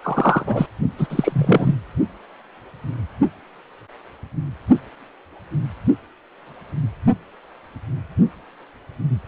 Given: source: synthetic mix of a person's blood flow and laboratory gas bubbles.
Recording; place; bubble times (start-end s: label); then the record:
Doppler ultrasound of blood flow; precordium
0.02-0.66 s: bubbles
0.98-1.07 s: bubbles
1.10-1.75 s: bubbles
From the record:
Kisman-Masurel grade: 223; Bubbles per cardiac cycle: several, 3 to 8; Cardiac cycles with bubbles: 10 to 50%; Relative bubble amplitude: loud (0.450 to 0.775); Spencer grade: 2 (many but less than half of the cardiac periods contain bubble signals, singularly or in groups); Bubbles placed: only in the low amplitude regions of the cardiac cycle